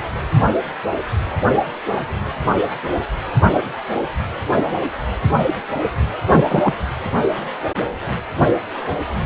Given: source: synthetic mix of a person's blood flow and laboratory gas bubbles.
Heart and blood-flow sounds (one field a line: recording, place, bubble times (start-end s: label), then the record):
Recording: Doppler ultrasound of blood flow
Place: precordium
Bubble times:
6.28-6.44 s: bubbles
6.47-6.73 s: bubbles
From the record:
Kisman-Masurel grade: 213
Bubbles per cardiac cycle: several, 3 to 8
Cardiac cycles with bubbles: 1 to 10%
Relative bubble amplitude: loud (0.450 to 0.775)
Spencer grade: 1 (occasional bubble signal discernible with the cardiac motion signal, with majority of cardiac periods free of bubbles)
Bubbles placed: anywhere in the cardiac cycle